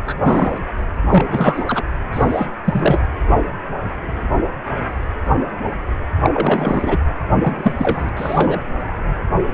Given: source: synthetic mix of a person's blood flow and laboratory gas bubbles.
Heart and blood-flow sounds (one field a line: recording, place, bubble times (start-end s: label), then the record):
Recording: Doppler ultrasound of blood flow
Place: precordium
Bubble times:
0.05-0.14 s: bubbles
0.23-0.58 s: bubbles
1.10-1.65 s: bubbles
1.67-1.82 s: bubbles
2.12-2.47 s: bubbles
2.65-3.05 s: bubbles
6.23-6.30 s: bubbles
6.34-6.97 s: bubbles
7.41-7.75 s: bubbles
7.77-8.09 s: bubbles
8.17-8.61 s: bubbles
From the record:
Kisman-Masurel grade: 233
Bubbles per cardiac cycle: several, 3 to 8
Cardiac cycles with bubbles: 50 to 99%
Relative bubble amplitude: loud (0.450 to 0.775)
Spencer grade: 3 (all of the cardiac periods contain showers or single bubble signals, but not dominating or overriding the cardiac motion signals)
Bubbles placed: anywhere in the cardiac cycle